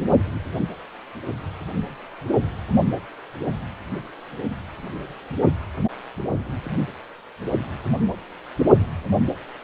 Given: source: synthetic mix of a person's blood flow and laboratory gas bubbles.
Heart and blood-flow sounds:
Doppler ultrasound of blood flow; precordium
no bubbles
From the record:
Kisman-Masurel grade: 000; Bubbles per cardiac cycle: 0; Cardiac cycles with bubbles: 0%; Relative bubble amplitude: no bubbles discernible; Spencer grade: 0 (complete lack of bubble signals)

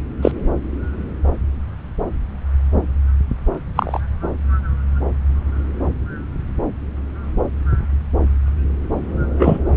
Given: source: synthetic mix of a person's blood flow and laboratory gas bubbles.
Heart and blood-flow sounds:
Doppler ultrasound of blood flow; subclavian vein
0.22-0.32 s: bubbles
3.75-4.00 s: bubbles
9.39-9.59 s: bubbles
From the record:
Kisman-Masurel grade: 123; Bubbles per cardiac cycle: 1 to 2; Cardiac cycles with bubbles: 10 to 50%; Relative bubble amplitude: loud (0.450 to 0.775); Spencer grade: 2 (many but less than half of the cardiac periods contain bubble signals, singularly or in groups); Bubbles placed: anywhere in the cardiac cycle

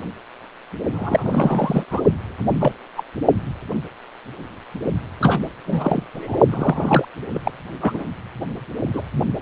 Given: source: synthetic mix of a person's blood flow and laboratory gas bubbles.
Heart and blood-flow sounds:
Doppler ultrasound of blood flow; precordium
0.93-1.85 s: bubbles
1.91-2.01 s: bubbles
2.61-2.74 s: bubbles
2.96-3.03 s: bubbles
5.21-5.39 s: bubbles
5.66-6.03 s: bubbles
6.14-6.39 s: bubbles
6.50-7.05 s: bubbles
7.33-7.39 s: bubbles
7.44-7.52 s: bubbles
7.81-8.04 s: bubbles
8.93-9.02 s: bubbles
From the record:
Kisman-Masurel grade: 232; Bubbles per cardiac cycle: several, 3 to 8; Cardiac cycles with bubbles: 50 to 99%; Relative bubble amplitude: moderate (0.250 to 0.450); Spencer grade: 3 (all of the cardiac periods contain showers or single bubble signals, but not dominating or overriding the cardiac motion signals); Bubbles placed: only in the low amplitude regions of the cardiac cycle

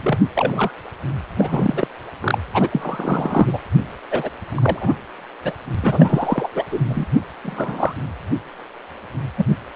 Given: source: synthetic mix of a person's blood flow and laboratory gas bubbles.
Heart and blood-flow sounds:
Doppler ultrasound of blood flow; precordium
0.02-0.19 s: bubbles
0.35-0.71 s: bubbles
1.38-1.87 s: bubbles
2.21-2.38 s: bubbles
2.54-3.58 s: bubbles
4.11-4.29 s: bubbles
4.50-4.96 s: bubbles
5.44-5.52 s: bubbles
5.81-6.47 s: bubbles
6.54-6.63 s: bubbles
6.71-6.79 s: bubbles
6.88-7.06 s: bubbles
7.42-7.94 s: bubbles
9.37-9.45 s: bubbles
From the record:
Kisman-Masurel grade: 233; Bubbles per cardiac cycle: several, 3 to 8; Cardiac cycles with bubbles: 50 to 99%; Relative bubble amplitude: loud (0.450 to 0.775); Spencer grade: 3 (all of the cardiac periods contain showers or single bubble signals, but not dominating or overriding the cardiac motion signals); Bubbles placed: anywhere in the cardiac cycle

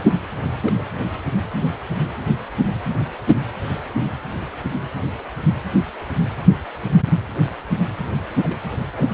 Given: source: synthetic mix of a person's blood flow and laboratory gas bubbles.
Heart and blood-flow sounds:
Doppler ultrasound of blood flow; precordium
0.62-0.73 s: bubbles
0.77-0.83 s: bubbles
8.43-8.59 s: bubbles
8.96-9.09 s: bubbles
From the record:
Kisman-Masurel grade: 121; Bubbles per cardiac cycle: 1 to 2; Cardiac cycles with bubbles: 10 to 50%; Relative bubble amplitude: barely perceptible (0.100 to 0.250); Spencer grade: 2 (many but less than half of the cardiac periods contain bubble signals, singularly or in groups); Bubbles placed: anywhere in the cardiac cycle

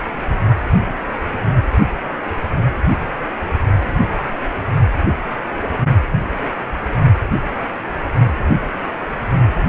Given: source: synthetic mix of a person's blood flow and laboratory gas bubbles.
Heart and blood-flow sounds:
Doppler ultrasound of blood flow; precordium
no bubbles
From the record:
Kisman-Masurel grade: 000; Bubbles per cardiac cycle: 0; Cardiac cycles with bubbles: 0%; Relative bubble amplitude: no bubbles discernible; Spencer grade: 0 (complete lack of bubble signals)

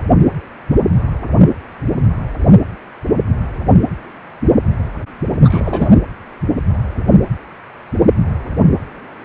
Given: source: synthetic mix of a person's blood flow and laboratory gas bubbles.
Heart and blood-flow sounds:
Doppler ultrasound of blood flow; precordium
5.44-6.01 s: bubbles
From the record:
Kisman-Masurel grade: 213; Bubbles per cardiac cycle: several, 3 to 8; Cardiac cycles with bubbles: 1 to 10%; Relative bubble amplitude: loud (0.450 to 0.775); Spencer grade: 1 (occasional bubble signal discernible with the cardiac motion signal, with majority of cardiac periods free of bubbles); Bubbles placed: anywhere in the cardiac cycle

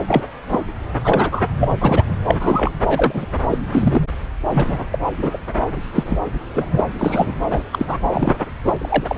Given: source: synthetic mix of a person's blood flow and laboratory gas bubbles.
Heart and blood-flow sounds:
Doppler ultrasound of blood flow; subclavian vein
0.07-0.23 s: bubbles
0.52-0.59 s: bubbles
1.04-1.29 s: bubbles
1.31-1.43 s: bubbles
1.60-1.69 s: bubbles
1.81-2.04 s: bubbles
2.08-2.18 s: bubbles
2.28-2.37 s: bubbles
2.40-2.72 s: bubbles
2.87-3.26 s: bubbles
3.49-3.58 s: bubbles
3.72-4.01 s: bubbles
4.50-4.84 s: bubbles
4.92-4.98 s: bubbles
5.19-5.38 s: bubbles
5.95-6.18 s: bubbles
6.51-6.85 s: bubbles
6.98-7.33 s: bubbles
7.50-7.63 s: bubbles
7.72-7.97 s: bubbles
8.11-8.34 s: bubbles
8.65-9.18 s: bubbles
From the record:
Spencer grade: 3 (all of the cardiac periods contain showers or single bubble signals, but not dominating or overriding the cardiac motion signals); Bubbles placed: anywhere in the cardiac cycle

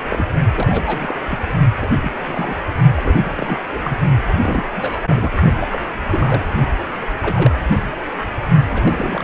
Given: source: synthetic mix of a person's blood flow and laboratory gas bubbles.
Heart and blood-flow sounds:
Doppler ultrasound of blood flow; precordium
0.10-0.25 s: bubbles
0.54-1.15 s: bubbles
1.28-1.39 s: bubbles
1.81-1.88 s: bubbles
1.95-2.10 s: bubbles
2.25-2.57 s: bubbles
2.95-3.17 s: bubbles
3.23-3.31 s: bubbles
3.35-3.58 s: bubbles
3.72-3.79 s: bubbles
3.83-3.97 s: bubbles
4.33-4.62 s: bubbles
4.75-5.01 s: bubbles
5.09-5.32 s: bubbles
5.57-5.84 s: bubbles
6.11-6.44 s: bubbles
7.01-7.06 s: bubbles
7.21-7.51 s: bubbles
7.71-7.77 s: bubbles
8.68-9.24 s: bubbles
From the record:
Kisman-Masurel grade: 242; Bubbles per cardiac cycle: several, 3 to 8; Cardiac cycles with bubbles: 100%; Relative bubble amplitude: moderate (0.250 to 0.450); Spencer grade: 3 (all of the cardiac periods contain showers or single bubble signals, but not dominating or overriding the cardiac motion signals); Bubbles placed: only in the low amplitude regions of the cardiac cycle

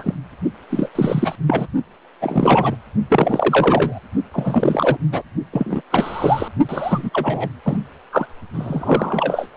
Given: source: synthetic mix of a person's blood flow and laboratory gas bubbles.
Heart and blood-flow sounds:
Doppler ultrasound of blood flow; precordium
0.00-0.14 s: bubbles
0.70-0.89 s: bubbles
0.95-1.35 s: bubbles
1.47-1.67 s: bubbles
2.21-2.76 s: bubbles
3.09-4.00 s: bubbles
4.33-4.97 s: bubbles
5.12-5.22 s: bubbles
5.52-5.81 s: bubbles
5.90-6.48 s: bubbles
6.68-7.09 s: bubbles
7.13-7.50 s: bubbles
7.65-7.78 s: bubbles
8.12-8.27 s: bubbles
8.54-9.48 s: bubbles
From the record:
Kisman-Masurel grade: 333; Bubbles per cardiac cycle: rolling drumbeat, 9 or more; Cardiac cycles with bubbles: 50 to 99%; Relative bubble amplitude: loud (0.450 to 0.775); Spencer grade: 3 (all of the cardiac periods contain showers or single bubble signals, but not dominating or overriding the cardiac motion signals); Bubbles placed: only in the low amplitude regions of the cardiac cycle

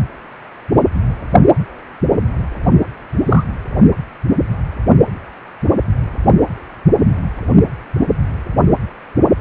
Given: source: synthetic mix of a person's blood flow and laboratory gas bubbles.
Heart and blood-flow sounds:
Doppler ultrasound of blood flow; precordium
3.29-3.44 s: bubbles
From the record:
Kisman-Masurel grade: 113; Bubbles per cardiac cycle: 1 to 2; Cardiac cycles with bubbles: 1 to 10%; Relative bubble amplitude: loud (0.450 to 0.775); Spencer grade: 1 (occasional bubble signal discernible with the cardiac motion signal, with majority of cardiac periods free of bubbles); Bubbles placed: only in the low amplitude regions of the cardiac cycle

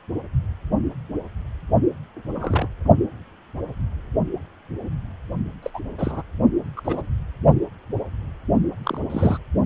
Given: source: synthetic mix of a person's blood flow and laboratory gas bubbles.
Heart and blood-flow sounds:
Doppler ultrasound of blood flow; precordium
2.35-2.68 s: bubbles
5.62-5.71 s: bubbles
5.74-5.79 s: bubbles
5.97-6.23 s: bubbles
6.76-6.81 s: bubbles
6.84-7.06 s: bubbles
8.83-9.01 s: bubbles
9.10-9.38 s: bubbles
From the record:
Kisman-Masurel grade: 232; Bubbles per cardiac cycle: several, 3 to 8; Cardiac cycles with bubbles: 50 to 99%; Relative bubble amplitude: moderate (0.250 to 0.450); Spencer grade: 3 (all of the cardiac periods contain showers or single bubble signals, but not dominating or overriding the cardiac motion signals); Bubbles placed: only in the low amplitude regions of the cardiac cycle

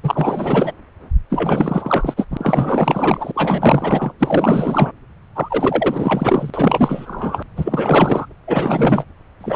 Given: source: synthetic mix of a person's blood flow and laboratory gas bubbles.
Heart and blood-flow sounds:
Doppler ultrasound of blood flow; subclavian vein
0.03-0.72 s: bubbles
1.30-2.14 s: bubbles
2.17-2.25 s: bubbles
2.30-3.31 s: bubbles
3.34-4.13 s: bubbles
4.19-4.92 s: bubbles
5.35-6.50 s: bubbles
6.53-7.43 s: bubbles
7.56-8.26 s: bubbles
8.47-9.04 s: bubbles
9.41-9.56 s: bubbles
From the record:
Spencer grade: 4 (maximum detectable bubble signal sounding continuously throughout systole and diastole of every cardiac period, and overriding the amplitude of the normal cardiac signals); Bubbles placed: anywhere in the cardiac cycle

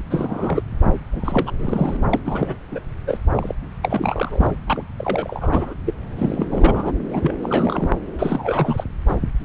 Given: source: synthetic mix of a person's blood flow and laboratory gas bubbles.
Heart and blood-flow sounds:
Doppler ultrasound of blood flow; subclavian vein
0.00-0.02 s: bubbles
0.10-0.62 s: bubbles
1.12-1.51 s: bubbles
1.58-1.97 s: bubbles
2.10-2.20 s: bubbles
2.25-2.57 s: bubbles
2.72-2.80 s: bubbles
3.06-3.18 s: bubbles
3.32-3.55 s: bubbles
3.82-4.51 s: bubbles
4.67-4.82 s: bubbles
4.97-5.75 s: bubbles
5.86-5.93 s: bubbles
6.18-6.46 s: bubbles
6.51-6.92 s: bubbles
7.05-7.34 s: bubbles
7.40-7.89 s: bubbles
8.19-8.84 s: bubbles
9.07-9.14 s: bubbles
From the record:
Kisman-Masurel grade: 342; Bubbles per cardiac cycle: rolling drumbeat, 9 or more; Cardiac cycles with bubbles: 100%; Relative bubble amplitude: moderate (0.250 to 0.450); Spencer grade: 3 (all of the cardiac periods contain showers or single bubble signals, but not dominating or overriding the cardiac motion signals); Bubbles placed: anywhere in the cardiac cycle

